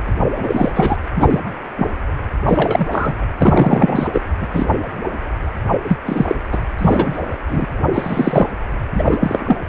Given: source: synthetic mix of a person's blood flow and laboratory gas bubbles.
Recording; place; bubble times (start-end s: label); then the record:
Doppler ultrasound of blood flow; precordium
0.35-0.96 s: bubbles
1.16-1.40 s: bubbles
1.77-1.92 s: bubbles
2.47-2.88 s: bubbles
2.91-3.15 s: bubbles
3.39-4.08 s: bubbles
4.12-4.21 s: bubbles
4.41-4.48 s: bubbles
4.53-4.67 s: bubbles
5.88-5.97 s: bubbles
6.06-6.36 s: bubbles
6.52-6.58 s: bubbles
6.78-7.38 s: bubbles
7.49-7.67 s: bubbles
7.93-8.47 s: bubbles
8.94-9.17 s: bubbles
9.20-9.57 s: bubbles
From the record:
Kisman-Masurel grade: 243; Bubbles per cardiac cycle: several, 3 to 8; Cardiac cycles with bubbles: 100%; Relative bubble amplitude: loud (0.450 to 0.775); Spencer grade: 3 (all of the cardiac periods contain showers or single bubble signals, but not dominating or overriding the cardiac motion signals); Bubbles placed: anywhere in the cardiac cycle